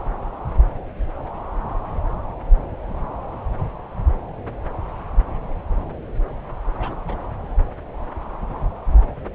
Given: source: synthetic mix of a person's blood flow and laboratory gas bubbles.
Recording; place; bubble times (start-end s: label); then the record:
Doppler ultrasound of blood flow; subclavian vein
6.73-6.96 s: bubbles
7.07-7.16 s: bubbles
From the record:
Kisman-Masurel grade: 111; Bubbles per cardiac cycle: 1 to 2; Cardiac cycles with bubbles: 1 to 10%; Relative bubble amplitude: barely perceptible (0.100 to 0.250); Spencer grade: 1 (occasional bubble signal discernible with the cardiac motion signal, with majority of cardiac periods free of bubbles); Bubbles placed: anywhere in the cardiac cycle